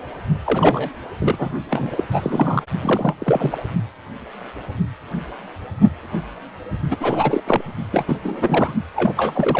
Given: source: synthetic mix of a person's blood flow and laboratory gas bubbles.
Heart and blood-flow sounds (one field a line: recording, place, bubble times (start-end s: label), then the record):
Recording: Doppler ultrasound of blood flow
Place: precordium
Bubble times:
0.44-0.89 s: bubbles
1.21-1.49 s: bubbles
1.70-2.04 s: bubbles
2.08-2.62 s: bubbles
2.81-3.15 s: bubbles
3.19-3.57 s: bubbles
6.91-6.97 s: bubbles
7.00-7.43 s: bubbles
7.46-7.62 s: bubbles
7.92-8.17 s: bubbles
8.22-8.76 s: bubbles
8.96-9.13 s: bubbles
9.16-9.60 s: bubbles
From the record:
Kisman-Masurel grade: 332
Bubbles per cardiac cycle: rolling drumbeat, 9 or more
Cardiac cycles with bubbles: 50 to 99%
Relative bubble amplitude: moderate (0.250 to 0.450)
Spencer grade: 3 (all of the cardiac periods contain showers or single bubble signals, but not dominating or overriding the cardiac motion signals)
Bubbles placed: only in the low amplitude regions of the cardiac cycle